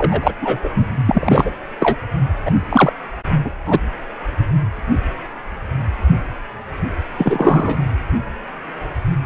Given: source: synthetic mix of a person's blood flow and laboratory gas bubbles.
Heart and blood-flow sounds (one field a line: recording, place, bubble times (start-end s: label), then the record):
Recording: Doppler ultrasound of blood flow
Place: precordium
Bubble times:
0.00-0.34 s: bubbles
0.41-0.59 s: bubbles
0.64-0.69 s: bubbles
0.74-0.86 s: bubbles
1.06-1.51 s: bubbles
1.79-1.97 s: bubbles
2.46-2.51 s: bubbles
2.69-2.93 s: bubbles
3.44-3.51 s: bubbles
3.65-3.80 s: bubbles
7.17-7.82 s: bubbles
From the record:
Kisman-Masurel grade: 223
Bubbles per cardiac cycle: several, 3 to 8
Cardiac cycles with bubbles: 10 to 50%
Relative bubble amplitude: loud (0.450 to 0.775)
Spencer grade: 2 (many but less than half of the cardiac periods contain bubble signals, singularly or in groups)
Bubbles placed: anywhere in the cardiac cycle